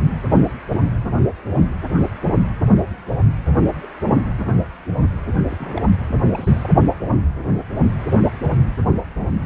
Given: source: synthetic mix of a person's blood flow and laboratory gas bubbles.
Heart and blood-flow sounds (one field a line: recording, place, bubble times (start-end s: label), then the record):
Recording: Doppler ultrasound of blood flow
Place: precordium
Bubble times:
0.00-0.03 s: bubbles
5.48-5.86 s: bubbles
6.08-6.17 s: bubbles
6.33-6.70 s: bubbles
From the record:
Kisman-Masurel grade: 221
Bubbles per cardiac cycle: several, 3 to 8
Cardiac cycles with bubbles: 10 to 50%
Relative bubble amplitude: barely perceptible (0.100 to 0.250)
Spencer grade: 2 (many but less than half of the cardiac periods contain bubble signals, singularly or in groups)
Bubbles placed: anywhere in the cardiac cycle